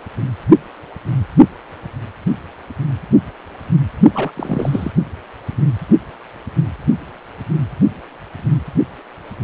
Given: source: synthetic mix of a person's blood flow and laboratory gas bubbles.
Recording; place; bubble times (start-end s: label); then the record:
Doppler ultrasound of blood flow; precordium
4.14-4.31 s: bubbles
4.37-4.92 s: bubbles
From the record:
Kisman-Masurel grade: 212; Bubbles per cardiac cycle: several, 3 to 8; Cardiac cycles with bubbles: 1 to 10%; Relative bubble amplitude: moderate (0.250 to 0.450); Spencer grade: 1 (occasional bubble signal discernible with the cardiac motion signal, with majority of cardiac periods free of bubbles); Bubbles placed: only in the low amplitude regions of the cardiac cycle